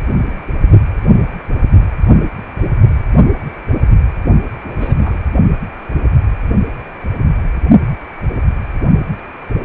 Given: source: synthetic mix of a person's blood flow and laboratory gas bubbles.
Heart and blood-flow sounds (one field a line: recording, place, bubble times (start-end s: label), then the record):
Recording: Doppler ultrasound of blood flow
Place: precordium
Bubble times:
4.63-5.23 s: bubbles
From the record:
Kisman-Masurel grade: 211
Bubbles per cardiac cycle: several, 3 to 8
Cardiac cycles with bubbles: 1 to 10%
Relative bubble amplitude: barely perceptible (0.100 to 0.250)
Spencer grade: 1 (occasional bubble signal discernible with the cardiac motion signal, with majority of cardiac periods free of bubbles)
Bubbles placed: only in the low amplitude regions of the cardiac cycle